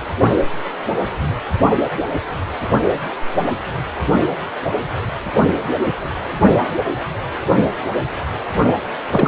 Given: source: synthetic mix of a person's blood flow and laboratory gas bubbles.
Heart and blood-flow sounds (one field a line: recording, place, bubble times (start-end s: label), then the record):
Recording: Doppler ultrasound of blood flow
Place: precordium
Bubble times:
9.09-9.28 s: bubbles
From the record:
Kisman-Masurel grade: 222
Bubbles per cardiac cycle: several, 3 to 8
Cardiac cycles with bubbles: 10 to 50%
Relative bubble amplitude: moderate (0.250 to 0.450)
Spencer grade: 2 (many but less than half of the cardiac periods contain bubble signals, singularly or in groups)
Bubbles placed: only in the low amplitude regions of the cardiac cycle